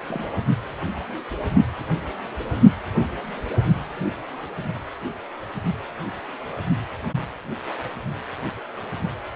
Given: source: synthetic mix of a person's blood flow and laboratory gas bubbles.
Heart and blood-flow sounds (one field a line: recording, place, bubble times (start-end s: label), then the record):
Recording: Doppler ultrasound of blood flow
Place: precordium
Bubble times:
0.00-0.02 s: bubbles
0.08-0.38 s: bubbles
From the record:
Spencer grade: 1 (occasional bubble signal discernible with the cardiac motion signal, with majority of cardiac periods free of bubbles)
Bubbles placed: only in the low amplitude regions of the cardiac cycle